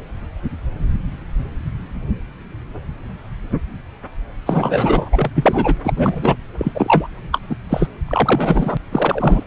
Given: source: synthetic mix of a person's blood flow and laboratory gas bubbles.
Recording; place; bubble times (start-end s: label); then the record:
Doppler ultrasound of blood flow; subclavian vein
4.46-5.31 s: bubbles
5.35-5.75 s: bubbles
5.83-5.94 s: bubbles
5.96-6.36 s: bubbles
6.58-7.09 s: bubbles
7.32-7.40 s: bubbles
7.50-7.56 s: bubbles
7.69-7.88 s: bubbles
8.07-8.77 s: bubbles
8.92-9.44 s: bubbles
From the record:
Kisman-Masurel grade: 233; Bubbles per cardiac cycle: several, 3 to 8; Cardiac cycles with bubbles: 50 to 99%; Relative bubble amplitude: loud (0.450 to 0.775); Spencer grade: 3 (all of the cardiac periods contain showers or single bubble signals, but not dominating or overriding the cardiac motion signals); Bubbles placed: anywhere in the cardiac cycle